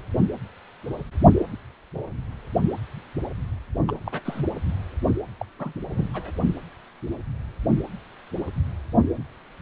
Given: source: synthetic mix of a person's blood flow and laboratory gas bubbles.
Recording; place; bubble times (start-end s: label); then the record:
Doppler ultrasound of blood flow; precordium
3.86-3.99 s: bubbles
4.06-4.21 s: bubbles
4.25-4.46 s: bubbles
5.39-5.46 s: bubbles
5.59-5.72 s: bubbles
5.89-6.09 s: bubbles
6.13-6.32 s: bubbles
From the record:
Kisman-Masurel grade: 221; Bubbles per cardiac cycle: several, 3 to 8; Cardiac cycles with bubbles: 10 to 50%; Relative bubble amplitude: barely perceptible (0.100 to 0.250); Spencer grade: 2 (many but less than half of the cardiac periods contain bubble signals, singularly or in groups); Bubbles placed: only in the low amplitude regions of the cardiac cycle